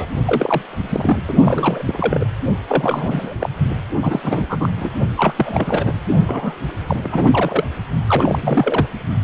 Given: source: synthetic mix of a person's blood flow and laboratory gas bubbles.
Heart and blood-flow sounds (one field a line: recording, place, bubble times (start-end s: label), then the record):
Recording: Doppler ultrasound of blood flow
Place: precordium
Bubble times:
0.00-0.06 s: bubbles
0.25-0.62 s: bubbles
0.69-1.20 s: bubbles
1.27-1.34 s: bubbles
1.45-1.84 s: bubbles
1.87-2.25 s: bubbles
2.67-3.34 s: bubbles
3.38-3.50 s: bubbles
4.01-4.20 s: bubbles
4.24-4.46 s: bubbles
4.49-4.74 s: bubbles
4.79-4.89 s: bubbles
5.17-5.33 s: bubbles
5.36-5.95 s: bubbles
6.26-6.54 s: bubbles
6.87-7.00 s: bubbles
7.03-7.64 s: bubbles
8.09-8.87 s: bubbles
From the record:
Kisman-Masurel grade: 342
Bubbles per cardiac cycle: rolling drumbeat, 9 or more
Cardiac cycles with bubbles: 100%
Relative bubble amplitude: moderate (0.250 to 0.450)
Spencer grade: 3 (all of the cardiac periods contain showers or single bubble signals, but not dominating or overriding the cardiac motion signals)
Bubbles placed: only in the low amplitude regions of the cardiac cycle